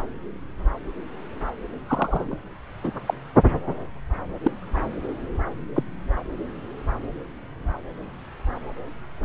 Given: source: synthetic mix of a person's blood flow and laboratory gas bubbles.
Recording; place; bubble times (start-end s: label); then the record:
Doppler ultrasound of blood flow; subclavian vein
1.87-2.38 s: bubbles
2.83-2.92 s: bubbles
3.07-3.14 s: bubbles
4.44-4.51 s: bubbles
4.73-4.83 s: bubbles
5.75-5.83 s: bubbles
From the record:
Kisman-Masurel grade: 122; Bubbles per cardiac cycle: 1 to 2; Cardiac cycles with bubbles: 10 to 50%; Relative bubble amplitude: moderate (0.250 to 0.450); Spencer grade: 2 (many but less than half of the cardiac periods contain bubble signals, singularly or in groups); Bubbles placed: anywhere in the cardiac cycle